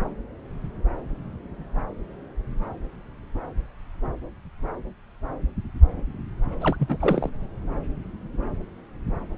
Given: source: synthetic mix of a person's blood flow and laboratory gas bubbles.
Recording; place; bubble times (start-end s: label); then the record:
Doppler ultrasound of blood flow; subclavian vein
6.60-6.76 s: bubbles
6.79-6.97 s: bubbles
7.00-7.29 s: bubbles
From the record:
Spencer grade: 1 (occasional bubble signal discernible with the cardiac motion signal, with majority of cardiac periods free of bubbles); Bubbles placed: anywhere in the cardiac cycle